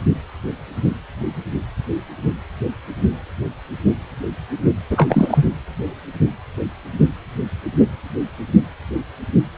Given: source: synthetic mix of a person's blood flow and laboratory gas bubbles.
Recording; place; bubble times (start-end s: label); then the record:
Doppler ultrasound of blood flow; precordium
4.91-5.48 s: bubbles
From the record:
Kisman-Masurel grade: 213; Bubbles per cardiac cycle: several, 3 to 8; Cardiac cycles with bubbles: 1 to 10%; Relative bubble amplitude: loud (0.450 to 0.775); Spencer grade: 1 (occasional bubble signal discernible with the cardiac motion signal, with majority of cardiac periods free of bubbles); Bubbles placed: anywhere in the cardiac cycle